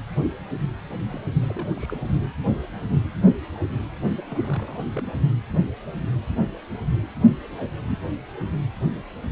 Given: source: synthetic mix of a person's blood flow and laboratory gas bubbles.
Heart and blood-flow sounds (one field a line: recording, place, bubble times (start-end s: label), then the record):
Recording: Doppler ultrasound of blood flow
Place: precordium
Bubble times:
1.10-1.26 s: bubbles
1.42-1.74 s: bubbles
1.77-2.10 s: bubbles
4.15-4.25 s: bubbles
4.30-4.87 s: bubbles
4.91-5.22 s: bubbles
From the record:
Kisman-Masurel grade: 211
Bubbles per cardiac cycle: several, 3 to 8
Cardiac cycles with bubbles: 1 to 10%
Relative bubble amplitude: barely perceptible (0.100 to 0.250)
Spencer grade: 1 (occasional bubble signal discernible with the cardiac motion signal, with majority of cardiac periods free of bubbles)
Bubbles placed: anywhere in the cardiac cycle